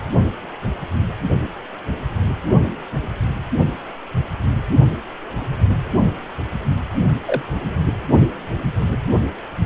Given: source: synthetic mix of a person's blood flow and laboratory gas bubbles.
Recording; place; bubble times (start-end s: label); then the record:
Doppler ultrasound of blood flow; precordium
7.25-7.42 s: bubbles
From the record:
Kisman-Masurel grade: 112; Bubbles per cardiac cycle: 1 to 2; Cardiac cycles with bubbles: 1 to 10%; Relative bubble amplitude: moderate (0.250 to 0.450); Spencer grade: 1 (occasional bubble signal discernible with the cardiac motion signal, with majority of cardiac periods free of bubbles); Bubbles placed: only in the low amplitude regions of the cardiac cycle